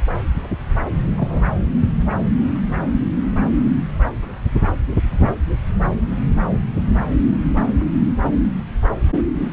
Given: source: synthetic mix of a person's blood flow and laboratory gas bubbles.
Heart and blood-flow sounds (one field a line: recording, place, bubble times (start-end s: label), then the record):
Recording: Doppler ultrasound of blood flow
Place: subclavian vein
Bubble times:
1.18-1.42 s: bubbles
From the record:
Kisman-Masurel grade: 112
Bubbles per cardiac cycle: 1 to 2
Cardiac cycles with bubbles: 1 to 10%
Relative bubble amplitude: moderate (0.250 to 0.450)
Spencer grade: 1 (occasional bubble signal discernible with the cardiac motion signal, with majority of cardiac periods free of bubbles)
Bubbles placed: anywhere in the cardiac cycle